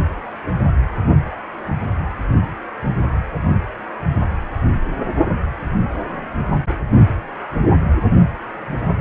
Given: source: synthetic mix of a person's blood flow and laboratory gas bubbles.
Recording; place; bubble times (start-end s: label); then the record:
Doppler ultrasound of blood flow; precordium
no bubbles
From the record:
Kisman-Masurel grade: 000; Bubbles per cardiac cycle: 0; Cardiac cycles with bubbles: 0%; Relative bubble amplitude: no bubbles discernible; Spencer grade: 0 (complete lack of bubble signals)